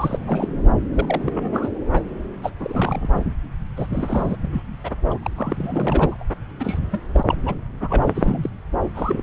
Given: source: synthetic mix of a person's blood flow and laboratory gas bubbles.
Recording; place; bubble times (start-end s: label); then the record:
Doppler ultrasound of blood flow; subclavian vein
0.00-0.19 s: bubbles
0.26-0.48 s: bubbles
0.93-1.70 s: bubbles
1.92-2.01 s: bubbles
2.42-2.51 s: bubbles
2.60-3.15 s: bubbles
3.76-3.87 s: bubbles
3.92-4.36 s: bubbles
4.42-4.62 s: bubbles
4.83-4.90 s: bubbles
5.10-5.18 s: bubbles
5.23-5.31 s: bubbles
5.36-6.24 s: bubbles
6.59-6.79 s: bubbles
6.91-7.03 s: bubbles
7.13-7.25 s: bubbles
7.27-7.37 s: bubbles
7.46-7.54 s: bubbles
7.81-8.49 s: bubbles
8.94-9.23 s: bubbles
From the record:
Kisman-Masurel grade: 342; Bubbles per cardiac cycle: rolling drumbeat, 9 or more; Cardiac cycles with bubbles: 100%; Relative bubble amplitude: moderate (0.250 to 0.450); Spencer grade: 3 (all of the cardiac periods contain showers or single bubble signals, but not dominating or overriding the cardiac motion signals); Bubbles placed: anywhere in the cardiac cycle